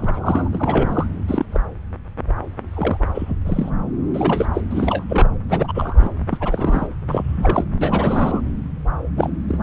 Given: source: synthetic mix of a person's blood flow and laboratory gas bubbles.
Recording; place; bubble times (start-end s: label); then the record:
Doppler ultrasound of blood flow; subclavian vein
0.00-0.50 s: bubbles
0.52-1.06 s: bubbles
1.27-1.46 s: bubbles
1.52-1.60 s: bubbles
2.75-2.97 s: bubbles
3.15-3.35 s: bubbles
3.44-3.71 s: bubbles
4.14-4.46 s: bubbles
4.53-4.61 s: bubbles
4.71-5.04 s: bubbles
5.08-5.28 s: bubbles
5.49-6.10 s: bubbles
6.33-6.38 s: bubbles
6.40-6.88 s: bubbles
7.08-7.64 s: bubbles
7.81-8.41 s: bubbles
9.17-9.30 s: bubbles
9.48-9.59 s: bubbles
From the record:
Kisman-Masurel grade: 232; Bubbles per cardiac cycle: several, 3 to 8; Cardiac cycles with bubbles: 50 to 99%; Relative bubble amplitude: moderate (0.250 to 0.450); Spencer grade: 3 (all of the cardiac periods contain showers or single bubble signals, but not dominating or overriding the cardiac motion signals); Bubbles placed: anywhere in the cardiac cycle